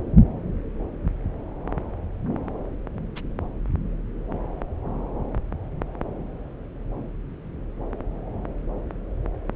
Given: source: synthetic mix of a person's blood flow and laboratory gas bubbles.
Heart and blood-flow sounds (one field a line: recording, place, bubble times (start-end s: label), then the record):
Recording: Doppler ultrasound of blood flow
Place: subclavian vein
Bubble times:
3.16-3.21 s: bubbles
From the record:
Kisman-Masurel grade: 111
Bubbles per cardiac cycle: 1 to 2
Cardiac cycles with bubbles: 1 to 10%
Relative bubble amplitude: barely perceptible (0.100 to 0.250)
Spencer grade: 1 (occasional bubble signal discernible with the cardiac motion signal, with majority of cardiac periods free of bubbles)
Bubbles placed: anywhere in the cardiac cycle